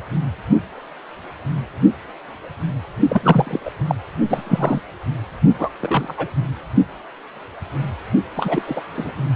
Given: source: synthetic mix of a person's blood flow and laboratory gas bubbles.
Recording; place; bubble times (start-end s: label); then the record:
Doppler ultrasound of blood flow; precordium
3.09-3.60 s: bubbles
3.65-3.72 s: bubbles
3.87-3.95 s: bubbles
4.29-4.81 s: bubbles
5.58-5.69 s: bubbles
5.79-6.14 s: bubbles
6.17-6.30 s: bubbles
8.36-8.62 s: bubbles
8.66-8.81 s: bubbles
8.96-9.12 s: bubbles
From the record:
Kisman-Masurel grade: 232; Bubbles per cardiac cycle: several, 3 to 8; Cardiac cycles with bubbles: 50 to 99%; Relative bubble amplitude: moderate (0.250 to 0.450); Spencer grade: 3 (all of the cardiac periods contain showers or single bubble signals, but not dominating or overriding the cardiac motion signals); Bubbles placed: only in the low amplitude regions of the cardiac cycle